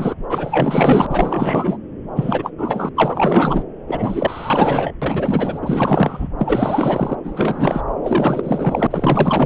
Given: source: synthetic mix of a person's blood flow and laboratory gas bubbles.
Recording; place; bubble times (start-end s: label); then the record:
Doppler ultrasound of blood flow; subclavian vein
0.00-0.14 s: bubbles
0.28-1.06 s: bubbles
1.10-1.77 s: bubbles
2.15-2.50 s: bubbles
2.57-2.89 s: bubbles
2.96-3.63 s: bubbles
3.87-4.92 s: bubbles
5.02-6.29 s: bubbles
6.38-7.15 s: bubbles
7.23-7.81 s: bubbles
8.02-8.87 s: bubbles
8.90-9.46 s: bubbles
From the record:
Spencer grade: 4 (maximum detectable bubble signal sounding continuously throughout systole and diastole of every cardiac period, and overriding the amplitude of the normal cardiac signals); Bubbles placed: anywhere in the cardiac cycle